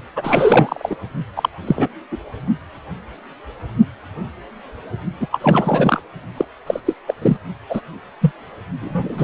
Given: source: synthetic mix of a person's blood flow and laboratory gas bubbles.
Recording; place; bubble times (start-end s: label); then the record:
Doppler ultrasound of blood flow; precordium
0.16-0.96 s: bubbles
1.35-1.49 s: bubbles
1.66-1.88 s: bubbles
2.11-2.17 s: bubbles
5.21-5.28 s: bubbles
5.32-6.00 s: bubbles
6.37-6.45 s: bubbles
6.67-6.80 s: bubbles
6.85-6.94 s: bubbles
7.07-7.14 s: bubbles
7.22-7.37 s: bubbles
7.70-7.81 s: bubbles
8.21-8.31 s: bubbles
8.81-9.24 s: bubbles
From the record:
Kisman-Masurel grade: 233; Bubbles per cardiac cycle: several, 3 to 8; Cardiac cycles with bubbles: 50 to 99%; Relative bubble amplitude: loud (0.450 to 0.775); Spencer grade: 3 (all of the cardiac periods contain showers or single bubble signals, but not dominating or overriding the cardiac motion signals); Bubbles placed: only in the low amplitude regions of the cardiac cycle